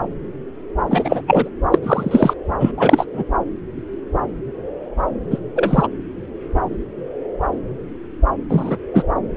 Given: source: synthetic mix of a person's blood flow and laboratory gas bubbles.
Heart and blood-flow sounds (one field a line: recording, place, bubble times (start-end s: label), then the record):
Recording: Doppler ultrasound of blood flow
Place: subclavian vein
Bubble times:
0.90-1.22 s: bubbles
1.27-1.50 s: bubbles
1.71-1.79 s: bubbles
1.83-2.33 s: bubbles
2.60-2.71 s: bubbles
2.77-3.05 s: bubbles
3.12-3.24 s: bubbles
5.30-5.39 s: bubbles
5.55-5.88 s: bubbles
8.49-8.77 s: bubbles
8.94-9.04 s: bubbles
From the record:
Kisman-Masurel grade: 233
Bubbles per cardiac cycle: several, 3 to 8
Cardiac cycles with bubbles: 50 to 99%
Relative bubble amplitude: loud (0.450 to 0.775)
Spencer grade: 3 (all of the cardiac periods contain showers or single bubble signals, but not dominating or overriding the cardiac motion signals)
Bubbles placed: anywhere in the cardiac cycle